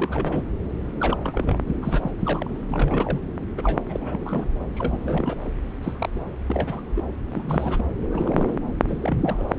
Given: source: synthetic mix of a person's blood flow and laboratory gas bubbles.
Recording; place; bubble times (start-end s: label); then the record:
Doppler ultrasound of blood flow; subclavian vein
0.00-0.43 s: bubbles
0.99-1.59 s: bubbles
1.66-1.75 s: bubbles
1.82-2.11 s: bubbles
2.18-2.63 s: bubbles
2.68-3.21 s: bubbles
3.57-3.80 s: bubbles
3.88-4.20 s: bubbles
4.23-4.46 s: bubbles
4.74-5.38 s: bubbles
5.42-5.51 s: bubbles
5.83-6.29 s: bubbles
6.46-6.83 s: bubbles
6.94-7.04 s: bubbles
7.27-7.86 s: bubbles
8.10-8.58 s: bubbles
8.88-9.14 s: bubbles
9.18-9.55 s: bubbles
From the record:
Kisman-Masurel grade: 342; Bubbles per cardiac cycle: rolling drumbeat, 9 or more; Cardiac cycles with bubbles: 100%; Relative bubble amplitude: moderate (0.250 to 0.450); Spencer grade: 3 (all of the cardiac periods contain showers or single bubble signals, but not dominating or overriding the cardiac motion signals); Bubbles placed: anywhere in the cardiac cycle